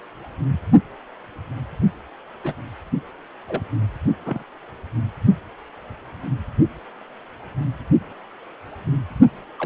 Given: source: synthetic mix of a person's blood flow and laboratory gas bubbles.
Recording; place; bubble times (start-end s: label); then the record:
Doppler ultrasound of blood flow; precordium
0.48-0.60 s: bubbles
2.44-2.53 s: bubbles
3.48-3.62 s: bubbles
4.26-4.43 s: bubbles
9.59-9.66 s: bubbles
From the record:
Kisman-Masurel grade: 121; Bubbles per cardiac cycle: 1 to 2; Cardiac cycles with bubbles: 10 to 50%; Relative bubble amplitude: barely perceptible (0.100 to 0.250); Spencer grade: 2 (many but less than half of the cardiac periods contain bubble signals, singularly or in groups); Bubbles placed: only in the low amplitude regions of the cardiac cycle